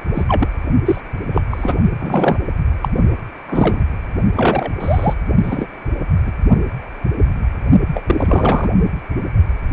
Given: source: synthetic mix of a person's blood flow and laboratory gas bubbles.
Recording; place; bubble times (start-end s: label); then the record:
Doppler ultrasound of blood flow; precordium
0.13-0.23 s: bubbles
0.28-0.48 s: bubbles
0.85-1.01 s: bubbles
1.33-1.42 s: bubbles
1.51-1.77 s: bubbles
1.99-2.38 s: bubbles
2.81-2.88 s: bubbles
3.47-3.82 s: bubbles
4.35-4.71 s: bubbles
4.80-5.13 s: bubbles
5.43-5.69 s: bubbles
6.26-6.32 s: bubbles
7.94-8.04 s: bubbles
8.06-8.70 s: bubbles
From the record:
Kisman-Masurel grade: 233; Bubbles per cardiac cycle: several, 3 to 8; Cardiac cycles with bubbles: 50 to 99%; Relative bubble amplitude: loud (0.450 to 0.775); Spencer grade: 3 (all of the cardiac periods contain showers or single bubble signals, but not dominating or overriding the cardiac motion signals); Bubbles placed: only in the low amplitude regions of the cardiac cycle